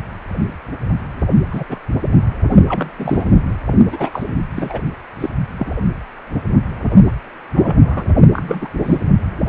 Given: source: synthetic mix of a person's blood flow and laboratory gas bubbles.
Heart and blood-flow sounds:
Doppler ultrasound of blood flow; precordium
1.52-1.64 s: bubbles
1.69-1.79 s: bubbles
2.68-2.90 s: bubbles
2.98-3.38 s: bubbles
3.92-4.23 s: bubbles
4.26-4.38 s: bubbles
4.54-4.81 s: bubbles
5.20-5.29 s: bubbles
5.58-5.72 s: bubbles
7.54-7.76 s: bubbles
7.83-8.03 s: bubbles
8.32-8.68 s: bubbles
8.84-8.99 s: bubbles
From the record:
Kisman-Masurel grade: 232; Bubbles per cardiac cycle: several, 3 to 8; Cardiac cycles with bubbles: 50 to 99%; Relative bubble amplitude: moderate (0.250 to 0.450); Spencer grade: 3 (all of the cardiac periods contain showers or single bubble signals, but not dominating or overriding the cardiac motion signals); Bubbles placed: only in the low amplitude regions of the cardiac cycle

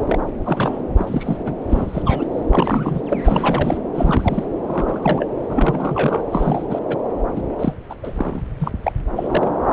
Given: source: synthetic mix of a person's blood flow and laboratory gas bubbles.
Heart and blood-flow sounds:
Doppler ultrasound of blood flow; subclavian vein
0.05-0.19 s: bubbles
0.43-0.81 s: bubbles
0.97-1.37 s: bubbles
1.44-1.56 s: bubbles
1.69-2.27 s: bubbles
2.47-3.02 s: bubbles
3.10-3.77 s: bubbles
3.94-4.46 s: bubbles
4.66-5.27 s: bubbles
5.47-6.21 s: bubbles
6.31-6.79 s: bubbles
6.88-6.96 s: bubbles
7.36-7.42 s: bubbles
7.59-7.74 s: bubbles
7.89-7.96 s: bubbles
8.03-8.42 s: bubbles
8.59-8.71 s: bubbles
8.83-8.92 s: bubbles
9.16-9.50 s: bubbles
9.60-9.73 s: bubbles
From the record:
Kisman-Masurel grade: 242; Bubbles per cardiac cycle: several, 3 to 8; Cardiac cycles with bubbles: 100%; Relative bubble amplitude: moderate (0.250 to 0.450); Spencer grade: 3 (all of the cardiac periods contain showers or single bubble signals, but not dominating or overriding the cardiac motion signals); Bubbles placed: anywhere in the cardiac cycle

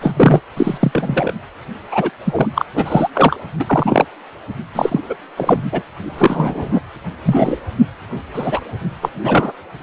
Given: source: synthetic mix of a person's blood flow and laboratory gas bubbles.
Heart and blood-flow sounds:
Doppler ultrasound of blood flow; precordium
0.01-0.40 s: bubbles
0.57-1.33 s: bubbles
1.91-2.10 s: bubbles
2.25-2.47 s: bubbles
2.55-2.65 s: bubbles
2.73-3.08 s: bubbles
3.15-3.36 s: bubbles
3.59-4.06 s: bubbles
4.75-5.00 s: bubbles
5.02-5.16 s: bubbles
5.37-5.64 s: bubbles
5.72-5.83 s: bubbles
6.02-6.79 s: bubbles
7.25-7.57 s: bubbles
8.34-8.62 s: bubbles
9.02-9.10 s: bubbles
9.23-9.52 s: bubbles
From the record:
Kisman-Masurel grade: 233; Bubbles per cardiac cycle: several, 3 to 8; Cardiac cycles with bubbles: 50 to 99%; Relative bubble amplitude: loud (0.450 to 0.775); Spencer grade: 3 (all of the cardiac periods contain showers or single bubble signals, but not dominating or overriding the cardiac motion signals); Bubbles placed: anywhere in the cardiac cycle

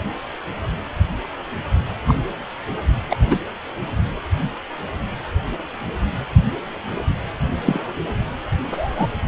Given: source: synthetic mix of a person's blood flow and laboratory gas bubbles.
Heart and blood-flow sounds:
Doppler ultrasound of blood flow; precordium
2.07-2.14 s: bubbles
3.10-3.17 s: bubbles
3.30-3.37 s: bubbles
7.65-7.80 s: bubbles
8.71-9.06 s: bubbles
From the record:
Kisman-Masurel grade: 123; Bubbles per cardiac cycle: 1 to 2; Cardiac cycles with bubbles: 10 to 50%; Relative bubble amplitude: loud (0.450 to 0.775); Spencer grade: 2 (many but less than half of the cardiac periods contain bubble signals, singularly or in groups); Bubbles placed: anywhere in the cardiac cycle

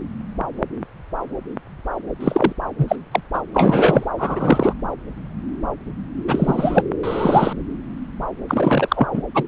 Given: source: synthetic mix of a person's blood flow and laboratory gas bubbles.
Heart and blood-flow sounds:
Doppler ultrasound of blood flow; subclavian vein
2.20-2.53 s: bubbles
2.78-2.96 s: bubbles
3.11-3.20 s: bubbles
3.33-3.42 s: bubbles
3.54-4.07 s: bubbles
4.18-4.73 s: bubbles
6.27-6.83 s: bubbles
7.03-7.53 s: bubbles
8.48-9.08 s: bubbles
9.13-9.21 s: bubbles
9.34-9.43 s: bubbles
From the record:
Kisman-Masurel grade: 233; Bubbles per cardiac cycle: several, 3 to 8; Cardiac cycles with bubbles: 50 to 99%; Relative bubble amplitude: loud (0.450 to 0.775); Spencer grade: 3 (all of the cardiac periods contain showers or single bubble signals, but not dominating or overriding the cardiac motion signals); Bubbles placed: anywhere in the cardiac cycle

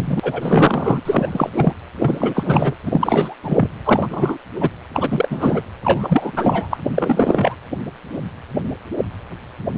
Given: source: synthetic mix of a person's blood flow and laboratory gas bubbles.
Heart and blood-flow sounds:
Doppler ultrasound of blood flow; precordium
0.00-0.20 s: bubbles
0.23-1.00 s: bubbles
1.05-1.73 s: bubbles
1.98-2.75 s: bubbles
2.85-3.36 s: bubbles
3.43-3.69 s: bubbles
3.85-4.38 s: bubbles
4.60-4.70 s: bubbles
4.93-5.60 s: bubbles
5.84-6.32 s: bubbles
6.36-6.77 s: bubbles
6.95-7.56 s: bubbles
From the record:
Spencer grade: 3 (all of the cardiac periods contain showers or single bubble signals, but not dominating or overriding the cardiac motion signals); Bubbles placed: anywhere in the cardiac cycle

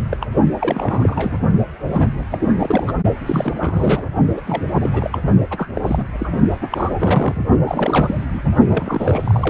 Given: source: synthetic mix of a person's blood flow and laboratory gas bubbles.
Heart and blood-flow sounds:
Doppler ultrasound of blood flow; precordium
0.09-0.17 s: bubbles
0.21-0.27 s: bubbles
0.58-1.38 s: bubbles
1.93-2.08 s: bubbles
2.30-2.48 s: bubbles
2.56-2.92 s: bubbles
3.25-4.02 s: bubbles
4.37-4.42 s: bubbles
4.46-4.62 s: bubbles
4.73-4.89 s: bubbles
4.92-5.18 s: bubbles
5.50-5.68 s: bubbles
5.73-6.05 s: bubbles
6.18-6.29 s: bubbles
6.70-7.45 s: bubbles
7.66-8.23 s: bubbles
8.33-8.42 s: bubbles
8.70-9.50 s: bubbles
From the record:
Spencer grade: 3 (all of the cardiac periods contain showers or single bubble signals, but not dominating or overriding the cardiac motion signals); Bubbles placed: only in the low amplitude regions of the cardiac cycle

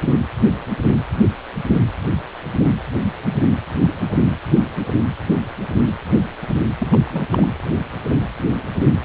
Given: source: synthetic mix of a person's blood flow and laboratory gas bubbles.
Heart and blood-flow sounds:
Doppler ultrasound of blood flow; precordium
6.78-6.88 s: bubbles
6.90-7.27 s: bubbles
7.31-7.46 s: bubbles
From the record:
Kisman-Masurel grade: 212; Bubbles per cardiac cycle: several, 3 to 8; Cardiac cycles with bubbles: 1 to 10%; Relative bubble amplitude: moderate (0.250 to 0.450); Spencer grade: 1 (occasional bubble signal discernible with the cardiac motion signal, with majority of cardiac periods free of bubbles); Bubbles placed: anywhere in the cardiac cycle

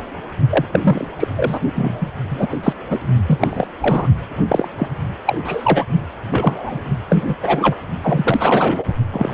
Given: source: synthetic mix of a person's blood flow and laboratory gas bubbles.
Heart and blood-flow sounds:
Doppler ultrasound of blood flow; precordium
0.00-0.03 s: bubbles
0.50-0.66 s: bubbles
0.72-1.07 s: bubbles
1.19-1.28 s: bubbles
1.36-1.59 s: bubbles
1.74-2.12 s: bubbles
2.30-2.46 s: bubbles
2.49-2.57 s: bubbles
2.63-2.73 s: bubbles
2.90-2.99 s: bubbles
3.27-3.67 s: bubbles
3.81-4.07 s: bubbles
4.48-4.68 s: bubbles
4.78-4.88 s: bubbles
5.25-5.38 s: bubbles
5.44-5.86 s: bubbles
6.31-6.79 s: bubbles
7.08-7.24 s: bubbles
7.29-7.34 s: bubbles
7.42-7.75 s: bubbles
8.02-8.85 s: bubbles
9.12-9.34 s: bubbles
From the record:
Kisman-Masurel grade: 243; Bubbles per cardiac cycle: several, 3 to 8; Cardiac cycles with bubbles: 100%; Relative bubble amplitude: loud (0.450 to 0.775); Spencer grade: 3 (all of the cardiac periods contain showers or single bubble signals, but not dominating or overriding the cardiac motion signals); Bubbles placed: only in the low amplitude regions of the cardiac cycle

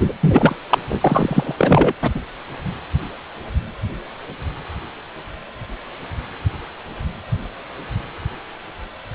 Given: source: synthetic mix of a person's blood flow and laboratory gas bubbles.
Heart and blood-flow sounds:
Doppler ultrasound of blood flow; precordium
0.00-0.12 s: bubbles
0.20-0.56 s: bubbles
0.69-0.78 s: bubbles
0.88-1.54 s: bubbles
1.57-1.94 s: bubbles
2.01-2.10 s: bubbles
2.15-2.20 s: bubbles
From the record:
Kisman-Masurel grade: 223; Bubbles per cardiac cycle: several, 3 to 8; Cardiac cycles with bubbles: 10 to 50%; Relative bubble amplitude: loud (0.450 to 0.775); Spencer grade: 2 (many but less than half of the cardiac periods contain bubble signals, singularly or in groups); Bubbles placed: anywhere in the cardiac cycle

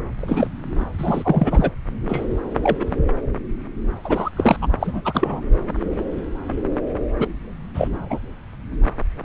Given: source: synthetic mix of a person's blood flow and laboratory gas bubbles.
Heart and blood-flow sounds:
Doppler ultrasound of blood flow; subclavian vein
0.18-0.48 s: bubbles
0.98-1.71 s: bubbles
2.08-2.25 s: bubbles
2.63-2.76 s: bubbles
2.79-2.85 s: bubbles
4.04-4.30 s: bubbles
4.36-4.56 s: bubbles
4.61-4.67 s: bubbles
4.80-5.02 s: bubbles
5.04-5.42 s: bubbles
7.18-7.27 s: bubbles
7.74-7.88 s: bubbles
8.10-8.19 s: bubbles
From the record:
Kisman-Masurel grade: 232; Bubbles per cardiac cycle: several, 3 to 8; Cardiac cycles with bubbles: 50 to 99%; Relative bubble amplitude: moderate (0.250 to 0.450); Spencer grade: 3 (all of the cardiac periods contain showers or single bubble signals, but not dominating or overriding the cardiac motion signals); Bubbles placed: anywhere in the cardiac cycle

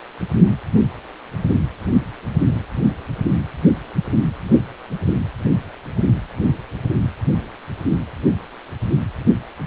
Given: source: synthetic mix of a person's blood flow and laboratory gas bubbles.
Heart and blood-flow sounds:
Doppler ultrasound of blood flow; precordium
no bubbles
From the record:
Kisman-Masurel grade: 000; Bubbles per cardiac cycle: 0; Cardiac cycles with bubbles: 0%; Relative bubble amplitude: no bubbles discernible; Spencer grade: 0 (complete lack of bubble signals)

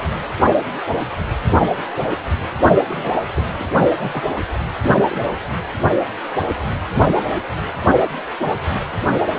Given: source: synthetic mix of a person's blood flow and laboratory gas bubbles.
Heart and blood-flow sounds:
Doppler ultrasound of blood flow; precordium
2.88-3.14 s: bubbles
3.35-3.43 s: bubbles
3.59-3.66 s: bubbles
3.98-4.23 s: bubbles
4.35-4.41 s: bubbles
5.09-5.21 s: bubbles
From the record:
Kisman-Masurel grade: 221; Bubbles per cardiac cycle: several, 3 to 8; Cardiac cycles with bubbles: 10 to 50%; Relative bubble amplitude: barely perceptible (0.100 to 0.250); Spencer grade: 2 (many but less than half of the cardiac periods contain bubble signals, singularly or in groups); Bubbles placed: only in the low amplitude regions of the cardiac cycle

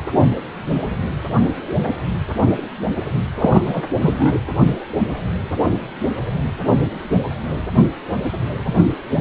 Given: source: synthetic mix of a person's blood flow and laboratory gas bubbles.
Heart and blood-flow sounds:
Doppler ultrasound of blood flow; precordium
3.38-3.62 s: bubbles
3.65-3.82 s: bubbles
4.00-4.33 s: bubbles
From the record:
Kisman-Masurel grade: 213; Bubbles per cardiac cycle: several, 3 to 8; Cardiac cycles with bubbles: 1 to 10%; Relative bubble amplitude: loud (0.450 to 0.775); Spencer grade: 1 (occasional bubble signal discernible with the cardiac motion signal, with majority of cardiac periods free of bubbles); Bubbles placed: anywhere in the cardiac cycle

